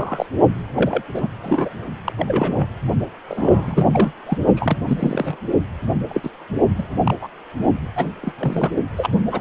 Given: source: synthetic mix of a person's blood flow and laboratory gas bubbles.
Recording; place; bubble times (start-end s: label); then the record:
Doppler ultrasound of blood flow; precordium
0.00-0.26 s: bubbles
0.76-1.02 s: bubbles
1.14-1.29 s: bubbles
1.44-1.69 s: bubbles
2.04-2.13 s: bubbles
2.18-2.67 s: bubbles
3.28-4.12 s: bubbles
4.26-4.38 s: bubbles
4.55-4.77 s: bubbles
4.88-5.37 s: bubbles
6.08-6.30 s: bubbles
6.78-6.83 s: bubbles
7.04-7.14 s: bubbles
7.21-7.29 s: bubbles
7.95-8.08 s: bubbles
8.21-8.33 s: bubbles
8.39-8.73 s: bubbles
8.96-9.09 s: bubbles
9.12-9.22 s: bubbles
9.32-9.41 s: bubbles
From the record:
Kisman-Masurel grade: 242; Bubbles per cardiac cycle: several, 3 to 8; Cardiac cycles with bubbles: 100%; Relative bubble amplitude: moderate (0.250 to 0.450); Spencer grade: 3 (all of the cardiac periods contain showers or single bubble signals, but not dominating or overriding the cardiac motion signals); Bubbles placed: only in the low amplitude regions of the cardiac cycle